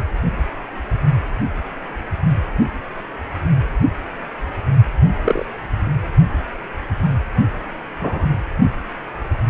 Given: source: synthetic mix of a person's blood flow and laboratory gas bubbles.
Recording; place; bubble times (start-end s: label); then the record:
Doppler ultrasound of blood flow; precordium
5.24-5.46 s: bubbles
8.01-8.26 s: bubbles
From the record:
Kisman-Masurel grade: 123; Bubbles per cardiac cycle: 1 to 2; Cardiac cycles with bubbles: 10 to 50%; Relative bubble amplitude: loud (0.450 to 0.775); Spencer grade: 2 (many but less than half of the cardiac periods contain bubble signals, singularly or in groups); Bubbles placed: anywhere in the cardiac cycle